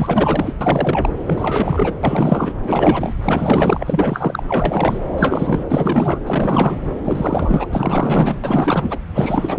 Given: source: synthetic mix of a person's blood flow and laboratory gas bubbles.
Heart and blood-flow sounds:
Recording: Doppler ultrasound of blood flow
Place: subclavian vein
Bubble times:
0.00-0.54 s: bubbles
0.61-1.12 s: bubbles
1.27-1.94 s: bubbles
2.03-2.55 s: bubbles
2.63-3.16 s: bubbles
3.23-4.43 s: bubbles
4.47-4.98 s: bubbles
5.16-5.65 s: bubbles
5.68-6.21 s: bubbles
6.26-6.76 s: bubbles
7.03-8.38 s: bubbles
8.44-8.99 s: bubbles
9.13-9.59 s: bubbles
From the record:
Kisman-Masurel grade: 444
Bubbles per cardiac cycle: continuous sound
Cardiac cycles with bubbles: 100%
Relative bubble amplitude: maximal (0.775 to 0.999)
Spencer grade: 4 (maximum detectable bubble signal sounding continuously throughout systole and diastole of every cardiac period, and overriding the amplitude of the normal cardiac signals)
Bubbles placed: anywhere in the cardiac cycle

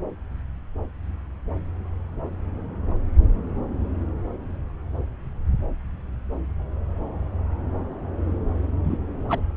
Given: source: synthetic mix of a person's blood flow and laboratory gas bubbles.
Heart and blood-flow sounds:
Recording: Doppler ultrasound of blood flow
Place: subclavian vein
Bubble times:
8.84-8.97 s: bubbles
9.29-9.41 s: bubbles
From the record:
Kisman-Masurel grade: 113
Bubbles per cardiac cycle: 1 to 2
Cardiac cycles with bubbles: 1 to 10%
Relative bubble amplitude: loud (0.450 to 0.775)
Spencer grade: 1 (occasional bubble signal discernible with the cardiac motion signal, with majority of cardiac periods free of bubbles)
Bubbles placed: anywhere in the cardiac cycle

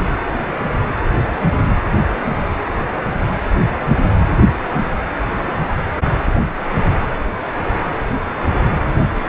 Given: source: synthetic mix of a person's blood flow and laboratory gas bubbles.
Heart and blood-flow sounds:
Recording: Doppler ultrasound of blood flow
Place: precordium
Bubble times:
no bubbles
From the record:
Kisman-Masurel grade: 000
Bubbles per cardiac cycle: 0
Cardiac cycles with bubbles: 0%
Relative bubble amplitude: no bubbles discernible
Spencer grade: 0 (complete lack of bubble signals)

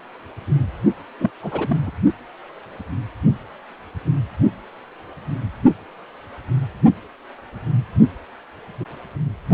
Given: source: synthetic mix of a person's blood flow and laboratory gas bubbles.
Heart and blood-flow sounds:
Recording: Doppler ultrasound of blood flow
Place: precordium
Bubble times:
1.19-1.31 s: bubbles
1.43-1.91 s: bubbles
From the record:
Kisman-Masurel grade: 222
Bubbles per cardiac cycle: several, 3 to 8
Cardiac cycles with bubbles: 10 to 50%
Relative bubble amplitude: moderate (0.250 to 0.450)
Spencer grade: 2 (many but less than half of the cardiac periods contain bubble signals, singularly or in groups)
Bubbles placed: only in the low amplitude regions of the cardiac cycle

